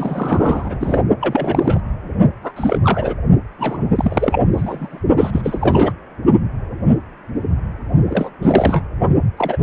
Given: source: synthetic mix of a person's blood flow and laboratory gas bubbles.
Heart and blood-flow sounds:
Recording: Doppler ultrasound of blood flow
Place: precordium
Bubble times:
0.00-1.02 s: bubbles
1.21-1.81 s: bubbles
2.43-2.52 s: bubbles
2.56-2.78 s: bubbles
2.82-3.15 s: bubbles
3.58-3.86 s: bubbles
3.95-4.46 s: bubbles
4.53-4.99 s: bubbles
5.18-5.93 s: bubbles
8.08-8.30 s: bubbles
8.42-8.84 s: bubbles
9.37-9.58 s: bubbles
From the record:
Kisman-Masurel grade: 332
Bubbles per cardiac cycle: rolling drumbeat, 9 or more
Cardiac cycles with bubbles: 50 to 99%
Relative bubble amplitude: moderate (0.250 to 0.450)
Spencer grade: 3 (all of the cardiac periods contain showers or single bubble signals, but not dominating or overriding the cardiac motion signals)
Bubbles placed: only in the low amplitude regions of the cardiac cycle

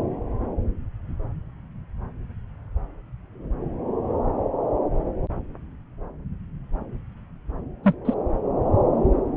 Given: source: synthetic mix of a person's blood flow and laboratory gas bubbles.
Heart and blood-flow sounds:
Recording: Doppler ultrasound of blood flow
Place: subclavian vein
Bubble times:
7.83-7.94 s: bubbles
8.05-8.14 s: bubbles
From the record:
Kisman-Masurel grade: 112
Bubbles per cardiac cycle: 1 to 2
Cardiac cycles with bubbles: 1 to 10%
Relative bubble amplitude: moderate (0.250 to 0.450)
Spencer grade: 1 (occasional bubble signal discernible with the cardiac motion signal, with majority of cardiac periods free of bubbles)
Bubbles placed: anywhere in the cardiac cycle

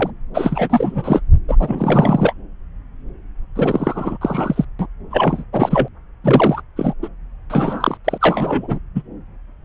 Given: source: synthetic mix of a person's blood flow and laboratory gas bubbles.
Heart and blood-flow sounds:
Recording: Doppler ultrasound of blood flow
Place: subclavian vein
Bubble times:
0.00-0.10 s: bubbles
0.34-1.21 s: bubbles
1.48-2.33 s: bubbles
3.56-4.17 s: bubbles
4.21-4.64 s: bubbles
4.79-4.87 s: bubbles
5.10-5.44 s: bubbles
5.53-5.88 s: bubbles
6.24-6.61 s: bubbles
6.76-6.93 s: bubbles
7.03-7.08 s: bubbles
7.50-7.98 s: bubbles
8.05-8.18 s: bubbles
8.21-8.79 s: bubbles
8.95-9.02 s: bubbles
From the record:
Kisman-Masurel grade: 333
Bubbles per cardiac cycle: rolling drumbeat, 9 or more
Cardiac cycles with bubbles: 50 to 99%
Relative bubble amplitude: loud (0.450 to 0.775)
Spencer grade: 3 (all of the cardiac periods contain showers or single bubble signals, but not dominating or overriding the cardiac motion signals)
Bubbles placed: anywhere in the cardiac cycle

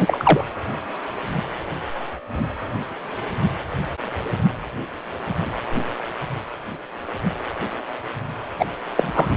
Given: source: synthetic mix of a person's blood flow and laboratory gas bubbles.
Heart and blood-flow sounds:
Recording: Doppler ultrasound of blood flow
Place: precordium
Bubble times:
0.00-0.43 s: bubbles
8.58-8.65 s: bubbles
8.96-9.29 s: bubbles
From the record:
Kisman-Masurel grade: 223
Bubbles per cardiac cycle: several, 3 to 8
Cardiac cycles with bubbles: 10 to 50%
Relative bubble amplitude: loud (0.450 to 0.775)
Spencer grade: 2 (many but less than half of the cardiac periods contain bubble signals, singularly or in groups)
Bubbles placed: anywhere in the cardiac cycle

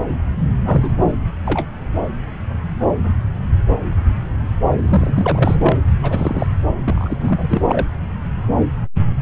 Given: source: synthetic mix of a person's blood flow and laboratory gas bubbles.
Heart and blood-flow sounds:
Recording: Doppler ultrasound of blood flow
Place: subclavian vein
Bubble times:
0.65-0.91 s: bubbles
1.07-1.11 s: bubbles
1.45-1.67 s: bubbles
4.79-5.77 s: bubbles
6.02-6.46 s: bubbles
6.85-7.17 s: bubbles
7.20-7.87 s: bubbles
From the record:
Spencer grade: 3 (all of the cardiac periods contain showers or single bubble signals, but not dominating or overriding the cardiac motion signals)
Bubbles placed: anywhere in the cardiac cycle

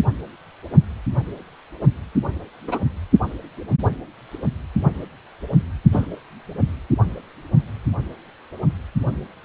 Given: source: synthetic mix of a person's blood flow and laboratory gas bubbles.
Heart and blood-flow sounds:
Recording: Doppler ultrasound of blood flow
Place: precordium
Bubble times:
2.67-2.79 s: bubbles
5.92-6.07 s: bubbles
From the record:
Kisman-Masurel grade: 122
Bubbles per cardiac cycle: 1 to 2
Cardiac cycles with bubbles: 10 to 50%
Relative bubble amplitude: moderate (0.250 to 0.450)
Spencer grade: 2 (many but less than half of the cardiac periods contain bubble signals, singularly or in groups)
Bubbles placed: only in the low amplitude regions of the cardiac cycle

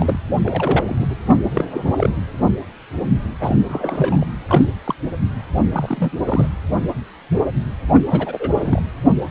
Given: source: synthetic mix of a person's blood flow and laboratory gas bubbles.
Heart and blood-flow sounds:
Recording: Doppler ultrasound of blood flow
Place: precordium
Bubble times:
0.00-0.21 s: bubbles
0.43-1.06 s: bubbles
1.10-1.16 s: bubbles
1.27-1.36 s: bubbles
1.54-1.70 s: bubbles
1.72-2.10 s: bubbles
3.41-3.56 s: bubbles
3.69-4.26 s: bubbles
4.49-4.70 s: bubbles
4.84-4.94 s: bubbles
5.72-6.11 s: bubbles
6.25-6.50 s: bubbles
7.93-8.04 s: bubbles
8.10-8.51 s: bubbles
8.55-8.81 s: bubbles
From the record:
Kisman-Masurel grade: 232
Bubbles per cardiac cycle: several, 3 to 8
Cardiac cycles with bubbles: 50 to 99%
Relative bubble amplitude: moderate (0.250 to 0.450)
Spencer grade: 3 (all of the cardiac periods contain showers or single bubble signals, but not dominating or overriding the cardiac motion signals)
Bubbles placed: anywhere in the cardiac cycle

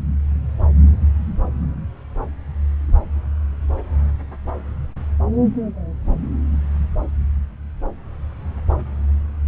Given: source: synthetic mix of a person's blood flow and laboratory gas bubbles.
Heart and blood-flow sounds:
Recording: Doppler ultrasound of blood flow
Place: subclavian vein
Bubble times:
no bubbles
From the record:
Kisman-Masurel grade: 000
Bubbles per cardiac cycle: 0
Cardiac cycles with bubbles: 0%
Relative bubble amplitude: no bubbles discernible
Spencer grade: 0 (complete lack of bubble signals)

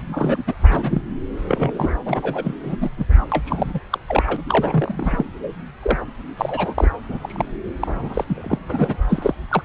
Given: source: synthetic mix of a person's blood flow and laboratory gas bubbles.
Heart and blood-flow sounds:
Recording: Doppler ultrasound of blood flow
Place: subclavian vein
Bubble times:
0.00-0.03 s: bubbles
0.08-0.43 s: bubbles
0.46-0.54 s: bubbles
0.66-1.02 s: bubbles
1.48-1.71 s: bubbles
1.74-1.92 s: bubbles
2.05-2.54 s: bubbles
2.63-2.75 s: bubbles
2.80-2.90 s: bubbles
2.97-3.05 s: bubbles
3.31-3.79 s: bubbles
3.90-3.98 s: bubbles
4.08-4.37 s: bubbles
4.48-5.26 s: bubbles
5.83-5.98 s: bubbles
6.37-6.90 s: bubbles
7.08-7.18 s: bubbles
7.21-7.45 s: bubbles
7.79-8.25 s: bubbles
8.28-8.58 s: bubbles
8.69-8.96 s: bubbles
9.09-9.35 s: bubbles
9.51-9.62 s: bubbles
From the record:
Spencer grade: 3 (all of the cardiac periods contain showers or single bubble signals, but not dominating or overriding the cardiac motion signals)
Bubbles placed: anywhere in the cardiac cycle

